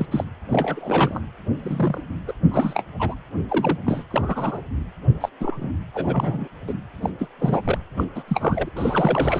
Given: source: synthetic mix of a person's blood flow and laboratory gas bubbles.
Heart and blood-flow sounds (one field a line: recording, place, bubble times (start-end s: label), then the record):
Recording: Doppler ultrasound of blood flow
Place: precordium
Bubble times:
0.00-0.06 s: bubbles
0.11-0.24 s: bubbles
0.52-1.21 s: bubbles
1.60-2.04 s: bubbles
2.27-2.33 s: bubbles
2.50-2.85 s: bubbles
2.98-3.15 s: bubbles
3.50-3.77 s: bubbles
3.86-4.04 s: bubbles
4.10-4.62 s: bubbles
5.20-5.29 s: bubbles
5.40-5.72 s: bubbles
5.94-6.48 s: bubbles
6.67-6.73 s: bubbles
7.02-7.10 s: bubbles
7.18-7.28 s: bubbles
7.39-7.61 s: bubbles
7.64-7.78 s: bubbles
7.96-8.05 s: bubbles
8.15-8.23 s: bubbles
8.28-8.69 s: bubbles
8.76-9.40 s: bubbles
From the record:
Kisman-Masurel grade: 242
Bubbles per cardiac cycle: several, 3 to 8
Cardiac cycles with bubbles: 100%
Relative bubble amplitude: moderate (0.250 to 0.450)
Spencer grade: 3 (all of the cardiac periods contain showers or single bubble signals, but not dominating or overriding the cardiac motion signals)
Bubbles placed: anywhere in the cardiac cycle